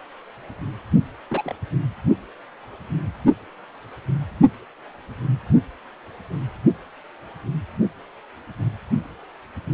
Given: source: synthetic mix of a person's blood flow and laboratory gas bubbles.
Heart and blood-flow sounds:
Doppler ultrasound of blood flow; precordium
1.30-1.54 s: bubbles
From the record:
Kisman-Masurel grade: 111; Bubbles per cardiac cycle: 1 to 2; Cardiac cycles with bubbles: 1 to 10%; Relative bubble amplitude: barely perceptible (0.100 to 0.250); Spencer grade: 1 (occasional bubble signal discernible with the cardiac motion signal, with majority of cardiac periods free of bubbles); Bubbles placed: only in the low amplitude regions of the cardiac cycle

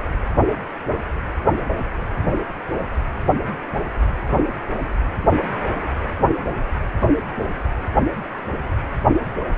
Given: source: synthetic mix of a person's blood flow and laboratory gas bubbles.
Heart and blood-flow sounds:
Doppler ultrasound of blood flow; precordium
no bubbles
From the record:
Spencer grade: 0 (complete lack of bubble signals)

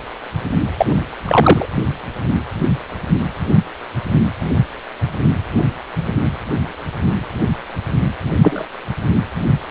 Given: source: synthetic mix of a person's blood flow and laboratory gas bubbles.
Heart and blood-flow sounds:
Doppler ultrasound of blood flow; precordium
0.77-0.86 s: bubbles
1.26-1.66 s: bubbles
8.41-8.65 s: bubbles
From the record:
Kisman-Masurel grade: 123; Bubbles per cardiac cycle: 1 to 2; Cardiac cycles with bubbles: 10 to 50%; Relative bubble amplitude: loud (0.450 to 0.775); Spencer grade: 2 (many but less than half of the cardiac periods contain bubble signals, singularly or in groups); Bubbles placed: anywhere in the cardiac cycle

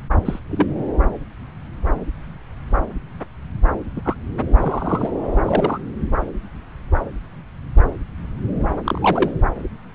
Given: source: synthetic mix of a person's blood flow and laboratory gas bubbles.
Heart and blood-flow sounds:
Doppler ultrasound of blood flow; subclavian vein
0.25-0.39 s: bubbles
0.51-0.66 s: bubbles
3.96-4.02 s: bubbles
4.05-4.15 s: bubbles
4.60-5.10 s: bubbles
5.43-5.78 s: bubbles
8.84-9.31 s: bubbles
From the record:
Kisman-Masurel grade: 122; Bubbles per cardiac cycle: 1 to 2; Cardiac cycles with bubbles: 10 to 50%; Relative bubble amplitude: moderate (0.250 to 0.450); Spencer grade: 2 (many but less than half of the cardiac periods contain bubble signals, singularly or in groups); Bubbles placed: anywhere in the cardiac cycle

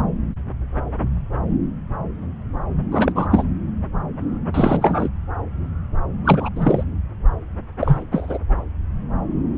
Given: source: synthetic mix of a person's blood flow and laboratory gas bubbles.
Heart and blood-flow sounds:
Doppler ultrasound of blood flow; subclavian vein
2.92-3.12 s: bubbles
3.15-3.27 s: bubbles
3.30-3.44 s: bubbles
4.54-5.09 s: bubbles
6.25-6.49 s: bubbles
6.56-6.83 s: bubbles
7.80-8.04 s: bubbles
8.12-8.38 s: bubbles
From the record:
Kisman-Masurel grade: 223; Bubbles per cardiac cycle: several, 3 to 8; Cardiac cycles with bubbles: 10 to 50%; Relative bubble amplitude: loud (0.450 to 0.775); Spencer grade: 2 (many but less than half of the cardiac periods contain bubble signals, singularly or in groups); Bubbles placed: anywhere in the cardiac cycle

